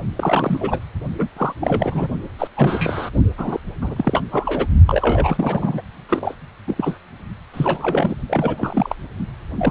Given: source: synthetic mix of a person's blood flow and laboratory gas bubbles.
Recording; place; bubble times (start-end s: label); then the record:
Doppler ultrasound of blood flow; precordium
0.16-0.80 s: bubbles
1.19-1.27 s: bubbles
1.37-1.54 s: bubbles
1.61-2.07 s: bubbles
2.38-2.48 s: bubbles
2.56-3.09 s: bubbles
3.38-3.59 s: bubbles
3.81-4.21 s: bubbles
4.31-4.67 s: bubbles
4.87-5.81 s: bubbles
6.08-6.34 s: bubbles
6.67-6.97 s: bubbles
7.54-8.15 s: bubbles
8.28-8.95 s: bubbles
9.59-9.71 s: bubbles
From the record:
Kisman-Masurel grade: 342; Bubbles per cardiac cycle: rolling drumbeat, 9 or more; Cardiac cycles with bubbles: 100%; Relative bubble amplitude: moderate (0.250 to 0.450); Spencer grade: 3 (all of the cardiac periods contain showers or single bubble signals, but not dominating or overriding the cardiac motion signals); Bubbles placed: only in the low amplitude regions of the cardiac cycle